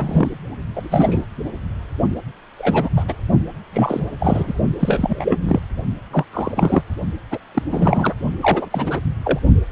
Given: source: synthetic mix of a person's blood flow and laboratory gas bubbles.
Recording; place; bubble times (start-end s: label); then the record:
Doppler ultrasound of blood flow; precordium
0.00-0.29 s: bubbles
0.75-1.22 s: bubbles
2.58-2.89 s: bubbles
2.96-3.04 s: bubbles
3.08-3.13 s: bubbles
3.72-4.00 s: bubbles
4.19-4.43 s: bubbles
4.46-4.54 s: bubbles
4.79-5.37 s: bubbles
5.42-5.59 s: bubbles
6.11-6.25 s: bubbles
6.33-6.83 s: bubbles
7.30-7.38 s: bubbles
7.54-7.62 s: bubbles
7.71-8.14 s: bubbles
8.42-8.69 s: bubbles
8.72-9.00 s: bubbles
9.23-9.39 s: bubbles
From the record:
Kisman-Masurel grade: 243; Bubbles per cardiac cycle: several, 3 to 8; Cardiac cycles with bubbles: 100%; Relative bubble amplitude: loud (0.450 to 0.775); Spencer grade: 3 (all of the cardiac periods contain showers or single bubble signals, but not dominating or overriding the cardiac motion signals); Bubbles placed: only in the low amplitude regions of the cardiac cycle